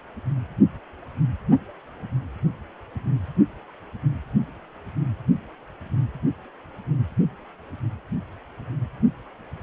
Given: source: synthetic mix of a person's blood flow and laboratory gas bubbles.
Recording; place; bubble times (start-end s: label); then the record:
Doppler ultrasound of blood flow; precordium
no bubbles
From the record:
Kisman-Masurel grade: 000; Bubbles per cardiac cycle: 0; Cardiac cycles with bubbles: 0%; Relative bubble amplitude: no bubbles discernible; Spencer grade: 0 (complete lack of bubble signals)